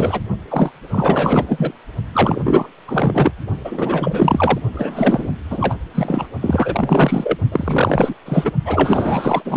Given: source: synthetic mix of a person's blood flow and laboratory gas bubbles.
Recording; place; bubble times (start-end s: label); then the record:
Doppler ultrasound of blood flow; precordium
0.00-0.21 s: bubbles
0.49-0.71 s: bubbles
0.90-1.73 s: bubbles
2.13-2.68 s: bubbles
2.88-3.33 s: bubbles
3.64-4.58 s: bubbles
4.73-5.33 s: bubbles
5.50-5.75 s: bubbles
5.95-6.27 s: bubbles
6.41-7.37 s: bubbles
7.52-8.14 s: bubbles
8.26-8.52 s: bubbles
8.65-9.42 s: bubbles
9.45-9.57 s: bubbles
From the record:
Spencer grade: 4 (maximum detectable bubble signal sounding continuously throughout systole and diastole of every cardiac period, and overriding the amplitude of the normal cardiac signals); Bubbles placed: only in the low amplitude regions of the cardiac cycle